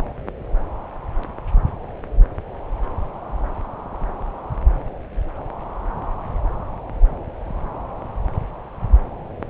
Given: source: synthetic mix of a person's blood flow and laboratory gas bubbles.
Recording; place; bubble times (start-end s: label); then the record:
Doppler ultrasound of blood flow; subclavian vein
no bubbles
From the record:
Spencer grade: 0 (complete lack of bubble signals)